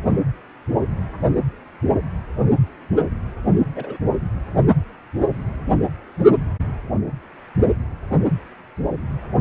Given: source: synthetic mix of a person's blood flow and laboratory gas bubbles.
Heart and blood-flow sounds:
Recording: Doppler ultrasound of blood flow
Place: precordium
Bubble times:
3.76-3.97 s: bubbles
From the record:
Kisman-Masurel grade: 112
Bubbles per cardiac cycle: 1 to 2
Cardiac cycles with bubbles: 1 to 10%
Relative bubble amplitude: moderate (0.250 to 0.450)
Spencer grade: 1 (occasional bubble signal discernible with the cardiac motion signal, with majority of cardiac periods free of bubbles)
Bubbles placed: anywhere in the cardiac cycle

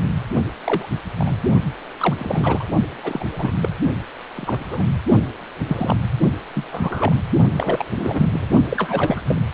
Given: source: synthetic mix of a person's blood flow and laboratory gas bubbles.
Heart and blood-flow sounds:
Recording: Doppler ultrasound of blood flow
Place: precordium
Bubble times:
0.64-0.90 s: bubbles
1.18-1.40 s: bubbles
1.99-2.15 s: bubbles
2.19-2.67 s: bubbles
3.03-3.25 s: bubbles
3.33-3.51 s: bubbles
3.60-3.69 s: bubbles
4.37-4.64 s: bubbles
4.70-4.85 s: bubbles
5.67-5.96 s: bubbles
6.54-6.67 s: bubbles
6.71-7.15 s: bubbles
7.56-7.86 s: bubbles
7.95-8.30 s: bubbles
8.33-8.46 s: bubbles
8.69-9.21 s: bubbles
9.27-9.39 s: bubbles
From the record:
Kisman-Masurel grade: 232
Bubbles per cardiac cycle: several, 3 to 8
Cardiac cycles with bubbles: 50 to 99%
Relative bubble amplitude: moderate (0.250 to 0.450)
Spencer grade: 3 (all of the cardiac periods contain showers or single bubble signals, but not dominating or overriding the cardiac motion signals)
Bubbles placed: only in the low amplitude regions of the cardiac cycle

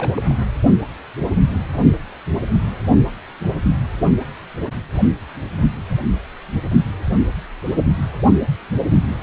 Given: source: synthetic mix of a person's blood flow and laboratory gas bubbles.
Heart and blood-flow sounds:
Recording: Doppler ultrasound of blood flow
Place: precordium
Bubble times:
0.00-0.24 s: bubbles
0.27-0.35 s: bubbles
From the record:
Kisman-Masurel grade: 211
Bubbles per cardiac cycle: several, 3 to 8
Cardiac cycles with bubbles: 1 to 10%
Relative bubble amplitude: barely perceptible (0.100 to 0.250)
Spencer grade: 1 (occasional bubble signal discernible with the cardiac motion signal, with majority of cardiac periods free of bubbles)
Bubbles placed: only in the low amplitude regions of the cardiac cycle

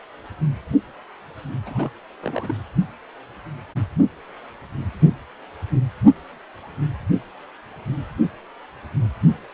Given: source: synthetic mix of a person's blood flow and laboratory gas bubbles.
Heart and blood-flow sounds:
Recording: Doppler ultrasound of blood flow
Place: precordium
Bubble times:
1.66-1.91 s: bubbles
2.22-2.55 s: bubbles
From the record:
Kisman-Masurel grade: 211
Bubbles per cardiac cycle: several, 3 to 8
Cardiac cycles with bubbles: 1 to 10%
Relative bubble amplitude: barely perceptible (0.100 to 0.250)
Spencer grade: 1 (occasional bubble signal discernible with the cardiac motion signal, with majority of cardiac periods free of bubbles)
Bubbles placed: only in the low amplitude regions of the cardiac cycle

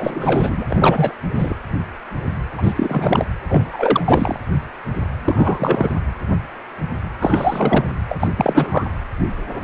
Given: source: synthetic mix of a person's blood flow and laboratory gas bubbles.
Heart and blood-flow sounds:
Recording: Doppler ultrasound of blood flow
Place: precordium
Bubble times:
0.00-0.66 s: bubbles
0.69-1.14 s: bubbles
1.34-1.55 s: bubbles
2.57-2.73 s: bubbles
2.76-3.27 s: bubbles
3.48-4.40 s: bubbles
5.24-5.91 s: bubbles
7.20-7.85 s: bubbles
8.09-8.28 s: bubbles
8.37-8.85 s: bubbles
From the record:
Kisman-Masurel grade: 333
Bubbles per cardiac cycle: rolling drumbeat, 9 or more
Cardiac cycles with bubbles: 50 to 99%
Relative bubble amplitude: loud (0.450 to 0.775)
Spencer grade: 3 (all of the cardiac periods contain showers or single bubble signals, but not dominating or overriding the cardiac motion signals)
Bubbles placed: anywhere in the cardiac cycle

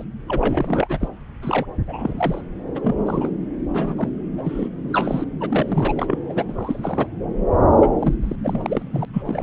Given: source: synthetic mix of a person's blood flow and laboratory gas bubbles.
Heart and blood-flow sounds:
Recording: Doppler ultrasound of blood flow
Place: subclavian vein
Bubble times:
0.00-0.04 s: bubbles
0.28-1.08 s: bubbles
1.42-1.66 s: bubbles
1.86-2.42 s: bubbles
2.75-2.96 s: bubbles
3.05-3.29 s: bubbles
3.72-4.09 s: bubbles
4.38-4.68 s: bubbles
4.89-5.25 s: bubbles
5.40-6.22 s: bubbles
6.29-6.44 s: bubbles
6.47-7.07 s: bubbles
7.81-7.88 s: bubbles
7.99-8.13 s: bubbles
8.22-8.36 s: bubbles
8.44-9.05 s: bubbles
9.13-9.43 s: bubbles
From the record:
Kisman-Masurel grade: 342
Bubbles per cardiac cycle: rolling drumbeat, 9 or more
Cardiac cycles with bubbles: 100%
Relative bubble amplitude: moderate (0.250 to 0.450)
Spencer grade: 3 (all of the cardiac periods contain showers or single bubble signals, but not dominating or overriding the cardiac motion signals)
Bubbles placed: anywhere in the cardiac cycle

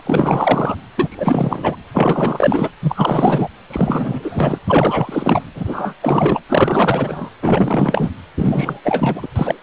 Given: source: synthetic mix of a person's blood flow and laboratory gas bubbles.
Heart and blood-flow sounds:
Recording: Doppler ultrasound of blood flow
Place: precordium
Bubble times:
0.00-0.02 s: bubbles
0.06-0.76 s: bubbles
0.96-1.76 s: bubbles
1.94-2.69 s: bubbles
2.81-3.48 s: bubbles
3.70-4.58 s: bubbles
4.67-5.42 s: bubbles
5.55-5.93 s: bubbles
6.02-6.39 s: bubbles
6.49-7.29 s: bubbles
7.42-8.11 s: bubbles
8.37-8.79 s: bubbles
8.84-9.28 s: bubbles
9.36-9.55 s: bubbles
From the record:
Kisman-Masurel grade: 444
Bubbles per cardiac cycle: continuous sound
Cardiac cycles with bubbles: 100%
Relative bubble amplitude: maximal (0.775 to 0.999)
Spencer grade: 4 (maximum detectable bubble signal sounding continuously throughout systole and diastole of every cardiac period, and overriding the amplitude of the normal cardiac signals)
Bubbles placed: anywhere in the cardiac cycle

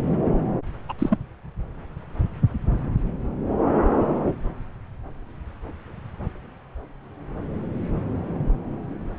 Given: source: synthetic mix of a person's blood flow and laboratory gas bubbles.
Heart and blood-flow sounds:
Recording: Doppler ultrasound of blood flow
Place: subclavian vein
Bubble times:
0.89-0.93 s: bubbles
0.99-1.18 s: bubbles
From the record:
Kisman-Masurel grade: 213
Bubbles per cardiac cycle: several, 3 to 8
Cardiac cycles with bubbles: 1 to 10%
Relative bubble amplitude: loud (0.450 to 0.775)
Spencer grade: 1 (occasional bubble signal discernible with the cardiac motion signal, with majority of cardiac periods free of bubbles)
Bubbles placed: anywhere in the cardiac cycle

